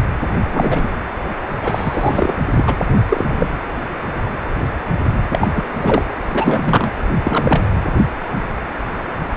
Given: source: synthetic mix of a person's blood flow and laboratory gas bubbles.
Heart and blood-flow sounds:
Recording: Doppler ultrasound of blood flow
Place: precordium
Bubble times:
0.52-0.89 s: bubbles
1.49-1.53 s: bubbles
1.63-2.34 s: bubbles
2.56-2.77 s: bubbles
3.08-3.47 s: bubbles
5.30-5.48 s: bubbles
5.54-5.63 s: bubbles
5.79-6.04 s: bubbles
6.33-6.92 s: bubbles
7.25-7.63 s: bubbles
From the record:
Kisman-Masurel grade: 223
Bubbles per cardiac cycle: several, 3 to 8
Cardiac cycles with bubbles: 10 to 50%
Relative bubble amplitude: loud (0.450 to 0.775)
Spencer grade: 2 (many but less than half of the cardiac periods contain bubble signals, singularly or in groups)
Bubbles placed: anywhere in the cardiac cycle

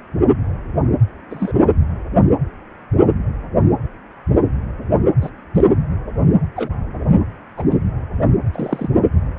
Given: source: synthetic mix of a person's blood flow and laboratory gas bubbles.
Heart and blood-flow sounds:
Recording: Doppler ultrasound of blood flow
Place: precordium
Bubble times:
1.30-1.52 s: bubbles
5.21-5.29 s: bubbles
5.54-5.65 s: bubbles
6.55-6.70 s: bubbles
7.57-7.62 s: bubbles
7.70-7.76 s: bubbles
8.53-8.88 s: bubbles
From the record:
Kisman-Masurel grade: 122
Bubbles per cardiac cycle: 1 to 2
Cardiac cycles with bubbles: 10 to 50%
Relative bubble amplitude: moderate (0.250 to 0.450)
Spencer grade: 2 (many but less than half of the cardiac periods contain bubble signals, singularly or in groups)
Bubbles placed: anywhere in the cardiac cycle

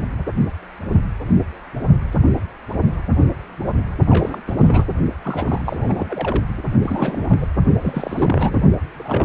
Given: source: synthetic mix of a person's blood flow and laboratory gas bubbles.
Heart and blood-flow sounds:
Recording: Doppler ultrasound of blood flow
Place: precordium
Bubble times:
4.06-4.42 s: bubbles
4.47-4.55 s: bubbles
4.58-4.84 s: bubbles
5.22-5.61 s: bubbles
5.64-6.45 s: bubbles
6.57-6.62 s: bubbles
6.82-7.27 s: bubbles
7.29-7.46 s: bubbles
7.82-8.63 s: bubbles
8.92-9.25 s: bubbles
From the record:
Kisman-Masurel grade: 332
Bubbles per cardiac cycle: rolling drumbeat, 9 or more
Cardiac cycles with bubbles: 50 to 99%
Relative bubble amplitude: moderate (0.250 to 0.450)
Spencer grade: 3 (all of the cardiac periods contain showers or single bubble signals, but not dominating or overriding the cardiac motion signals)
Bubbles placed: only in the low amplitude regions of the cardiac cycle

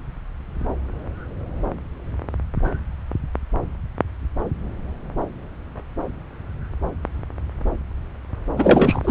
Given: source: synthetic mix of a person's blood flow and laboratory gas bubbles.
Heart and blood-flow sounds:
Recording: Doppler ultrasound of blood flow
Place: subclavian vein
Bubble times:
8.57-9.11 s: bubbles
From the record:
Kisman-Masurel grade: 213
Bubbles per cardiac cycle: several, 3 to 8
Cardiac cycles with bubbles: 1 to 10%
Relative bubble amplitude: loud (0.450 to 0.775)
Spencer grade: 1 (occasional bubble signal discernible with the cardiac motion signal, with majority of cardiac periods free of bubbles)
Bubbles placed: anywhere in the cardiac cycle

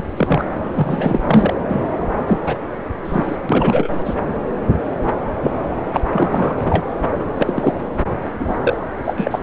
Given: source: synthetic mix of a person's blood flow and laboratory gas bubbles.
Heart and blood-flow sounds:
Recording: Doppler ultrasound of blood flow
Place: subclavian vein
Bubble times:
0.17-0.44 s: bubbles
0.74-1.20 s: bubbles
1.26-1.54 s: bubbles
1.68-1.87 s: bubbles
2.26-2.38 s: bubbles
2.46-2.55 s: bubbles
3.05-3.36 s: bubbles
3.49-3.90 s: bubbles
4.04-4.14 s: bubbles
5.42-5.51 s: bubbles
5.92-6.00 s: bubbles
6.12-6.55 s: bubbles
6.58-6.84 s: bubbles
7.15-7.74 s: bubbles
8.40-8.56 s: bubbles
8.60-8.77 s: bubbles
9.04-9.14 s: bubbles
9.17-9.39 s: bubbles
From the record:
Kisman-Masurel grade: 233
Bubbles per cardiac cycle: several, 3 to 8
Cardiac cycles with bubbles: 50 to 99%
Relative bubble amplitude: loud (0.450 to 0.775)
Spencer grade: 3 (all of the cardiac periods contain showers or single bubble signals, but not dominating or overriding the cardiac motion signals)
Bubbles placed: anywhere in the cardiac cycle

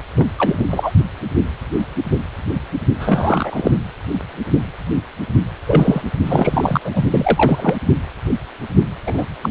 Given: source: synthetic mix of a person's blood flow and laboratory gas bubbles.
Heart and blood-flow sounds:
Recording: Doppler ultrasound of blood flow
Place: precordium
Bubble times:
0.00-0.03 s: bubbles
0.16-0.30 s: bubbles
0.39-0.66 s: bubbles
0.70-0.91 s: bubbles
3.00-3.71 s: bubbles
5.67-6.02 s: bubbles
6.27-6.79 s: bubbles
6.84-7.03 s: bubbles
7.11-7.77 s: bubbles
9.06-9.23 s: bubbles
9.41-9.49 s: bubbles
From the record:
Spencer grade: 3 (all of the cardiac periods contain showers or single bubble signals, but not dominating or overriding the cardiac motion signals)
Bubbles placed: only in the low amplitude regions of the cardiac cycle

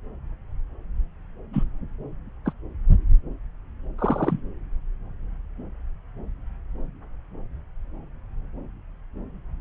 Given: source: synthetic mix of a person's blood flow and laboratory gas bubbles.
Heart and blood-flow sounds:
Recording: Doppler ultrasound of blood flow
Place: subclavian vein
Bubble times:
1.52-1.64 s: bubbles
2.45-2.53 s: bubbles
3.98-4.41 s: bubbles
From the record:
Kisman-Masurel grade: 122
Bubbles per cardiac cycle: 1 to 2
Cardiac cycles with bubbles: 10 to 50%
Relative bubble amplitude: moderate (0.250 to 0.450)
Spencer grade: 2 (many but less than half of the cardiac periods contain bubble signals, singularly or in groups)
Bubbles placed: anywhere in the cardiac cycle

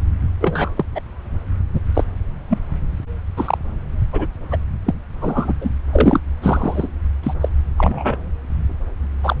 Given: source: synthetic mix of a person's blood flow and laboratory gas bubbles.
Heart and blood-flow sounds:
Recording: Doppler ultrasound of blood flow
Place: subclavian vein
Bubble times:
0.40-0.69 s: bubbles
0.76-0.85 s: bubbles
0.94-1.00 s: bubbles
1.73-1.80 s: bubbles
1.94-2.04 s: bubbles
2.50-2.58 s: bubbles
3.36-3.58 s: bubbles
4.12-4.26 s: bubbles
4.50-4.57 s: bubbles
4.86-4.95 s: bubbles
5.21-5.54 s: bubbles
5.60-5.70 s: bubbles
5.89-6.20 s: bubbles
6.42-6.88 s: bubbles
7.23-7.33 s: bubbles
7.41-7.49 s: bubbles
7.77-8.17 s: bubbles
9.23-9.36 s: bubbles
From the record:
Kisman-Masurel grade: 233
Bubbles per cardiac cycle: several, 3 to 8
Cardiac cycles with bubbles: 50 to 99%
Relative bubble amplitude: loud (0.450 to 0.775)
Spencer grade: 3 (all of the cardiac periods contain showers or single bubble signals, but not dominating or overriding the cardiac motion signals)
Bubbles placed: anywhere in the cardiac cycle

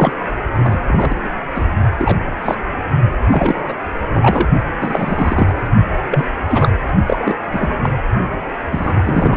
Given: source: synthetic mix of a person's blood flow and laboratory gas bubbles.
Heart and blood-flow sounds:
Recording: Doppler ultrasound of blood flow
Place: precordium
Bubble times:
0.00-0.13 s: bubbles
0.57-0.80 s: bubbles
0.86-1.17 s: bubbles
1.55-1.66 s: bubbles
1.98-2.18 s: bubbles
2.45-2.55 s: bubbles
3.31-3.60 s: bubbles
3.68-3.74 s: bubbles
4.13-4.48 s: bubbles
4.81-5.54 s: bubbles
6.11-6.24 s: bubbles
6.33-6.78 s: bubbles
7.06-7.37 s: bubbles
7.53-7.67 s: bubbles
7.83-7.91 s: bubbles
8.71-9.37 s: bubbles
From the record:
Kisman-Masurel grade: 243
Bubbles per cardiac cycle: several, 3 to 8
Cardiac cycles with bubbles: 100%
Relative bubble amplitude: loud (0.450 to 0.775)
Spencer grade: 3 (all of the cardiac periods contain showers or single bubble signals, but not dominating or overriding the cardiac motion signals)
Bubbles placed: only in the low amplitude regions of the cardiac cycle

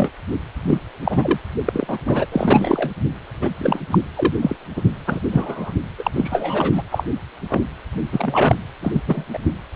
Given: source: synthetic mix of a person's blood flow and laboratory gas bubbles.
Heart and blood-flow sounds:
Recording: Doppler ultrasound of blood flow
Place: precordium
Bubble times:
0.00-0.10 s: bubbles
0.62-0.78 s: bubbles
1.04-1.39 s: bubbles
1.65-1.98 s: bubbles
2.05-2.27 s: bubbles
2.32-2.92 s: bubbles
3.33-3.50 s: bubbles
3.58-3.81 s: bubbles
3.90-3.98 s: bubbles
4.17-4.33 s: bubbles
4.42-4.56 s: bubbles
4.76-4.83 s: bubbles
5.06-5.20 s: bubbles
5.30-5.71 s: bubbles
5.98-6.11 s: bubbles
6.15-6.83 s: bubbles
6.91-7.03 s: bubbles
7.49-7.64 s: bubbles
8.12-8.56 s: bubbles
8.82-9.02 s: bubbles
9.07-9.25 s: bubbles
9.33-9.38 s: bubbles
From the record:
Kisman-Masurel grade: 243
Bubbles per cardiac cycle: several, 3 to 8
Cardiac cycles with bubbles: 100%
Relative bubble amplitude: loud (0.450 to 0.775)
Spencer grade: 3 (all of the cardiac periods contain showers or single bubble signals, but not dominating or overriding the cardiac motion signals)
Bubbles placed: anywhere in the cardiac cycle

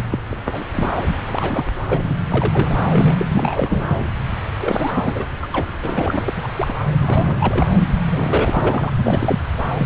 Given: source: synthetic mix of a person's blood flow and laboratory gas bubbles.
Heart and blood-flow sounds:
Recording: Doppler ultrasound of blood flow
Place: subclavian vein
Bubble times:
0.00-0.02 s: bubbles
0.12-0.19 s: bubbles
0.33-0.40 s: bubbles
0.46-0.64 s: bubbles
0.73-1.04 s: bubbles
1.06-1.15 s: bubbles
1.25-1.65 s: bubbles
1.89-2.15 s: bubbles
2.30-2.88 s: bubbles
2.93-3.16 s: bubbles
3.19-3.25 s: bubbles
3.31-4.04 s: bubbles
4.60-4.92 s: bubbles
4.95-5.24 s: bubbles
5.42-5.47 s: bubbles
5.52-5.67 s: bubbles
5.82-6.33 s: bubbles
6.35-6.74 s: bubbles
6.78-6.83 s: bubbles
7.00-7.67 s: bubbles
8.06-8.90 s: bubbles
8.97-9.39 s: bubbles
9.78-9.86 s: bubbles
From the record:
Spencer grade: 3 (all of the cardiac periods contain showers or single bubble signals, but not dominating or overriding the cardiac motion signals)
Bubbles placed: anywhere in the cardiac cycle

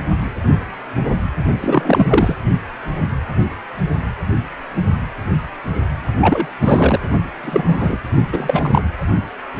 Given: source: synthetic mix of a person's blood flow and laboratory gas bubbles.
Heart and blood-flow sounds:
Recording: Doppler ultrasound of blood flow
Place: precordium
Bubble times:
1.60-2.35 s: bubbles
6.20-6.46 s: bubbles
6.60-7.00 s: bubbles
7.42-7.98 s: bubbles
8.32-8.86 s: bubbles
From the record:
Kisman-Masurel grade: 223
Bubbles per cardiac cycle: several, 3 to 8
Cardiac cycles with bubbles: 10 to 50%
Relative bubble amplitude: loud (0.450 to 0.775)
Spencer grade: 2 (many but less than half of the cardiac periods contain bubble signals, singularly or in groups)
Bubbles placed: only in the low amplitude regions of the cardiac cycle

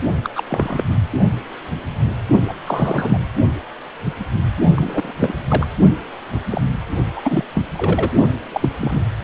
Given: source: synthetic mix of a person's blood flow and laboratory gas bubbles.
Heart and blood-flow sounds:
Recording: Doppler ultrasound of blood flow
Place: precordium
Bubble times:
0.23-0.30 s: bubbles
0.35-0.43 s: bubbles
0.47-0.84 s: bubbles
2.47-2.54 s: bubbles
2.67-3.18 s: bubbles
4.75-5.12 s: bubbles
5.20-5.35 s: bubbles
5.48-5.67 s: bubbles
6.33-6.41 s: bubbles
6.50-6.62 s: bubbles
7.13-7.44 s: bubbles
7.54-7.63 s: bubbles
7.73-8.11 s: bubbles
8.51-8.68 s: bubbles
8.80-9.04 s: bubbles
From the record:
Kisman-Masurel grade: 232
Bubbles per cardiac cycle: several, 3 to 8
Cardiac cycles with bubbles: 50 to 99%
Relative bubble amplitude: moderate (0.250 to 0.450)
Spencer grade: 3 (all of the cardiac periods contain showers or single bubble signals, but not dominating or overriding the cardiac motion signals)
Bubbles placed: only in the low amplitude regions of the cardiac cycle

